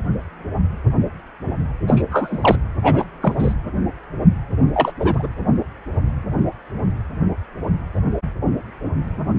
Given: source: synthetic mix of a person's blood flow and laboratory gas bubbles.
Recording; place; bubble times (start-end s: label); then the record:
Doppler ultrasound of blood flow; precordium
1.87-2.02 s: bubbles
2.10-2.56 s: bubbles
2.83-3.04 s: bubbles
3.22-3.35 s: bubbles
3.39-3.54 s: bubbles
4.74-4.92 s: bubbles
5.00-5.27 s: bubbles
From the record:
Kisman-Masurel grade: 223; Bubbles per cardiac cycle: several, 3 to 8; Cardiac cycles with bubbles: 10 to 50%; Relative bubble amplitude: loud (0.450 to 0.775); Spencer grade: 2 (many but less than half of the cardiac periods contain bubble signals, singularly or in groups); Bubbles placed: anywhere in the cardiac cycle